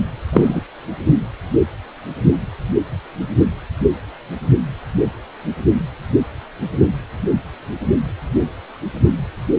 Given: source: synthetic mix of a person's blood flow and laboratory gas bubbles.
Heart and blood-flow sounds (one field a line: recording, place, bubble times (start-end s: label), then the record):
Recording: Doppler ultrasound of blood flow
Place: precordium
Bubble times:
0.33-0.62 s: bubbles
From the record:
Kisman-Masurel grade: 113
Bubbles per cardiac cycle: 1 to 2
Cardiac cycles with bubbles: 1 to 10%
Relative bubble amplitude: loud (0.450 to 0.775)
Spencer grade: 1 (occasional bubble signal discernible with the cardiac motion signal, with majority of cardiac periods free of bubbles)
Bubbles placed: only in the low amplitude regions of the cardiac cycle